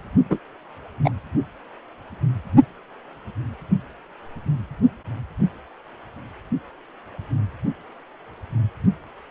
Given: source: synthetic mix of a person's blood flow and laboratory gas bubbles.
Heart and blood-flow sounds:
Doppler ultrasound of blood flow; precordium
0.30-0.38 s: bubbles
1.04-1.10 s: bubbles
From the record:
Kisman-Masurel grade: 123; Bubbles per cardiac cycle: 1 to 2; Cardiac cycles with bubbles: 10 to 50%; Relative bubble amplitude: loud (0.450 to 0.775); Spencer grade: 2 (many but less than half of the cardiac periods contain bubble signals, singularly or in groups); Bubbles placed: only in the low amplitude regions of the cardiac cycle

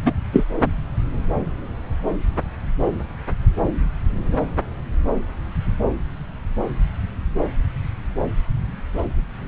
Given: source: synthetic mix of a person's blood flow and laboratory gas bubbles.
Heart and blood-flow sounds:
Doppler ultrasound of blood flow; subclavian vein
0.05-0.12 s: bubbles
0.32-0.44 s: bubbles
From the record:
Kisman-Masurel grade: 113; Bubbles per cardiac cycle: 1 to 2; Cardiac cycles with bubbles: 1 to 10%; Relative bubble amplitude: loud (0.450 to 0.775); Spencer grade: 1 (occasional bubble signal discernible with the cardiac motion signal, with majority of cardiac periods free of bubbles); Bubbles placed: anywhere in the cardiac cycle

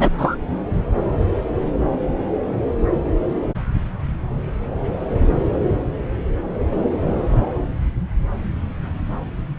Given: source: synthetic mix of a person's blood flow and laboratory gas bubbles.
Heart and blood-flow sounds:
Doppler ultrasound of blood flow; subclavian vein
0.00-0.10 s: bubbles
0.17-0.36 s: bubbles
From the record:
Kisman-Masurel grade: 113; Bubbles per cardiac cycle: 1 to 2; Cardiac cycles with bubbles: 1 to 10%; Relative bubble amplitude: loud (0.450 to 0.775); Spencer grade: 1 (occasional bubble signal discernible with the cardiac motion signal, with majority of cardiac periods free of bubbles); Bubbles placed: anywhere in the cardiac cycle

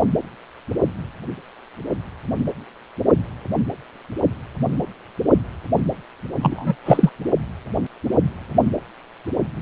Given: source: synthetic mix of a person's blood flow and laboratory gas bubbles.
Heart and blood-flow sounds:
Doppler ultrasound of blood flow; precordium
6.42-6.75 s: bubbles
6.85-7.10 s: bubbles
From the record:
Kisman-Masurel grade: 223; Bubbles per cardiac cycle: several, 3 to 8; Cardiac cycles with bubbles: 10 to 50%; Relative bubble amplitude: loud (0.450 to 0.775); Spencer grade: 2 (many but less than half of the cardiac periods contain bubble signals, singularly or in groups); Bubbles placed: anywhere in the cardiac cycle

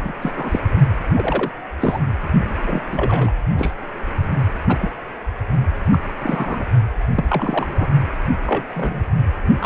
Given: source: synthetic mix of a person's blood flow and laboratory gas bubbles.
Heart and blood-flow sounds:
Doppler ultrasound of blood flow; precordium
0.00-0.12 s: bubbles
0.22-0.34 s: bubbles
0.36-0.59 s: bubbles
1.14-1.52 s: bubbles
1.79-1.99 s: bubbles
2.63-2.82 s: bubbles
2.92-3.32 s: bubbles
3.54-3.71 s: bubbles
4.68-4.92 s: bubbles
5.92-5.99 s: bubbles
6.20-6.66 s: bubbles
7.14-7.25 s: bubbles
7.29-7.89 s: bubbles
8.46-8.64 s: bubbles
8.70-9.03 s: bubbles
9.45-9.53 s: bubbles
9.60-9.66 s: bubbles
From the record:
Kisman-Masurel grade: 242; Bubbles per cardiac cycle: several, 3 to 8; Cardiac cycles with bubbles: 100%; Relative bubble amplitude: moderate (0.250 to 0.450); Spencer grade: 3 (all of the cardiac periods contain showers or single bubble signals, but not dominating or overriding the cardiac motion signals); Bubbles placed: anywhere in the cardiac cycle

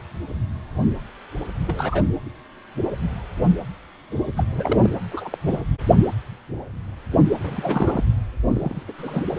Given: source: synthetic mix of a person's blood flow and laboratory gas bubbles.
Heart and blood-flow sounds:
Doppler ultrasound of blood flow; precordium
1.66-2.06 s: bubbles
4.37-4.44 s: bubbles
4.52-4.91 s: bubbles
5.11-5.38 s: bubbles
5.44-5.59 s: bubbles
7.43-8.04 s: bubbles
8.51-8.92 s: bubbles
8.98-9.24 s: bubbles
From the record:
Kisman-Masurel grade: 232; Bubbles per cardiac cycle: several, 3 to 8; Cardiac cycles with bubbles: 50 to 99%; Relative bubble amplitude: moderate (0.250 to 0.450); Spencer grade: 3 (all of the cardiac periods contain showers or single bubble signals, but not dominating or overriding the cardiac motion signals); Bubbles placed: anywhere in the cardiac cycle

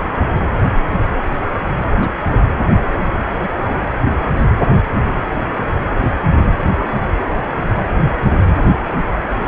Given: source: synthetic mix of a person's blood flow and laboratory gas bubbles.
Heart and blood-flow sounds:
Doppler ultrasound of blood flow; precordium
2.01-2.08 s: bubbles
From the record:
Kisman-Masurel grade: 122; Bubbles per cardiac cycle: 1 to 2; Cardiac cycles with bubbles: 10 to 50%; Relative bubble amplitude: moderate (0.250 to 0.450); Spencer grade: 2 (many but less than half of the cardiac periods contain bubble signals, singularly or in groups); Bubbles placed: anywhere in the cardiac cycle

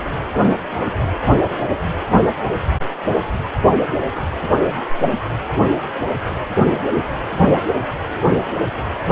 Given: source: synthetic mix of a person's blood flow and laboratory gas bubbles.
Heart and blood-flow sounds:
Doppler ultrasound of blood flow; precordium
no bubbles
From the record:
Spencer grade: 0 (complete lack of bubble signals)

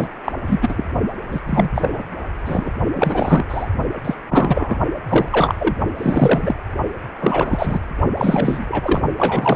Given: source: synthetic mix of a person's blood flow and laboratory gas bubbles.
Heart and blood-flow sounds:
Doppler ultrasound of blood flow; precordium
0.00-0.09 s: bubbles
0.24-0.32 s: bubbles
0.46-0.86 s: bubbles
1.30-1.40 s: bubbles
1.46-1.69 s: bubbles
1.74-2.02 s: bubbles
2.45-2.70 s: bubbles
2.94-3.46 s: bubbles
3.49-3.68 s: bubbles
4.04-4.14 s: bubbles
4.29-4.77 s: bubbles
5.08-5.55 s: bubbles
5.58-5.75 s: bubbles
5.97-6.55 s: bubbles
7.21-7.79 s: bubbles
8.18-9.01 s: bubbles
9.17-9.56 s: bubbles
From the record:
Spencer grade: 3 (all of the cardiac periods contain showers or single bubble signals, but not dominating or overriding the cardiac motion signals); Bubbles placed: only in the low amplitude regions of the cardiac cycle

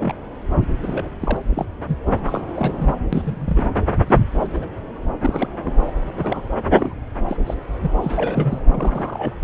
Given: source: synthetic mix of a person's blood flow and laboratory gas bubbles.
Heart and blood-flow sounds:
Doppler ultrasound of blood flow; subclavian vein
0.00-0.15 s: bubbles
0.61-0.66 s: bubbles
0.82-1.09 s: bubbles
1.21-1.37 s: bubbles
1.50-1.65 s: bubbles
1.88-1.96 s: bubbles
2.25-2.42 s: bubbles
2.56-2.94 s: bubbles
3.12-3.68 s: bubbles
4.07-4.22 s: bubbles
4.40-4.47 s: bubbles
4.53-4.66 s: bubbles
5.21-5.49 s: bubbles
5.64-5.73 s: bubbles
5.87-5.92 s: bubbles
6.06-6.46 s: bubbles
6.65-6.69 s: bubbles
6.72-6.94 s: bubbles
7.28-7.37 s: bubbles
7.47-7.54 s: bubbles
7.83-7.91 s: bubbles
8.01-8.61 s: bubbles
8.74-9.35 s: bubbles
From the record:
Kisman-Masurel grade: 242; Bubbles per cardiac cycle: several, 3 to 8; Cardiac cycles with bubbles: 100%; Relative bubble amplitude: moderate (0.250 to 0.450); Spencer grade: 3 (all of the cardiac periods contain showers or single bubble signals, but not dominating or overriding the cardiac motion signals); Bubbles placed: anywhere in the cardiac cycle

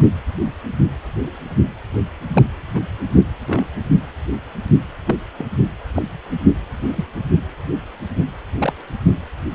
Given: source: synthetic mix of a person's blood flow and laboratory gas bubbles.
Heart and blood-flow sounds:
Doppler ultrasound of blood flow; precordium
0.00-0.02 s: bubbles
2.33-2.44 s: bubbles
2.74-2.80 s: bubbles
3.46-3.65 s: bubbles
5.08-5.16 s: bubbles
5.38-5.46 s: bubbles
5.95-6.02 s: bubbles
6.76-7.06 s: bubbles
8.60-8.73 s: bubbles
From the record:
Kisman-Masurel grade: 122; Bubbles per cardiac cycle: 1 to 2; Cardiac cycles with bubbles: 10 to 50%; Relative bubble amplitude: moderate (0.250 to 0.450); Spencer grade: 2 (many but less than half of the cardiac periods contain bubble signals, singularly or in groups); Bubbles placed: anywhere in the cardiac cycle

